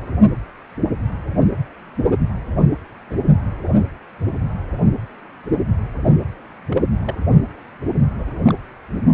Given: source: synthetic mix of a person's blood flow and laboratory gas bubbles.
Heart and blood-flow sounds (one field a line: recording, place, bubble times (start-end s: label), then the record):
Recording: Doppler ultrasound of blood flow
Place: precordium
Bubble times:
3.10-3.17 s: bubbles
6.69-6.83 s: bubbles
7.04-7.15 s: bubbles
8.19-8.54 s: bubbles
From the record:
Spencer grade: 2 (many but less than half of the cardiac periods contain bubble signals, singularly or in groups)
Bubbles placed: only in the low amplitude regions of the cardiac cycle